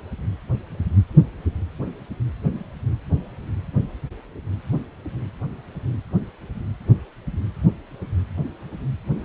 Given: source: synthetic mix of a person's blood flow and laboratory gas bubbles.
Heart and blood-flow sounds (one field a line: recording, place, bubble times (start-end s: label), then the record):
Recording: Doppler ultrasound of blood flow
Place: precordium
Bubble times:
no bubbles
From the record:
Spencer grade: 0 (complete lack of bubble signals)